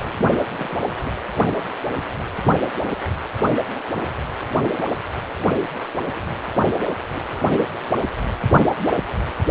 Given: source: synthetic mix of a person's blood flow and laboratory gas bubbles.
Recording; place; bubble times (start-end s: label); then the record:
Doppler ultrasound of blood flow; precordium
0.00-0.12 s: bubbles
0.18-0.37 s: bubbles
0.58-0.75 s: bubbles
1.05-1.17 s: bubbles
6.78-6.81 s: bubbles
7.13-7.22 s: bubbles
7.30-7.45 s: bubbles
From the record:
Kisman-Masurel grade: 221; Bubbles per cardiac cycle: several, 3 to 8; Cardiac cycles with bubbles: 10 to 50%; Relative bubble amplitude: barely perceptible (0.100 to 0.250); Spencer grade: 2 (many but less than half of the cardiac periods contain bubble signals, singularly or in groups); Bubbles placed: anywhere in the cardiac cycle